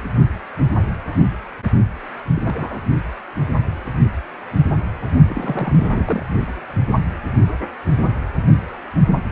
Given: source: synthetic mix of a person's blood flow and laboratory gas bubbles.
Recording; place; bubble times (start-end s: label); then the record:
Doppler ultrasound of blood flow; precordium
2.34-2.85 s: bubbles
5.28-6.25 s: bubbles
From the record:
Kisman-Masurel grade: 221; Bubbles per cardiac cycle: several, 3 to 8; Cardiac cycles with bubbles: 10 to 50%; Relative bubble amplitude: barely perceptible (0.100 to 0.250); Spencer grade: 2 (many but less than half of the cardiac periods contain bubble signals, singularly or in groups); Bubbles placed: only in the low amplitude regions of the cardiac cycle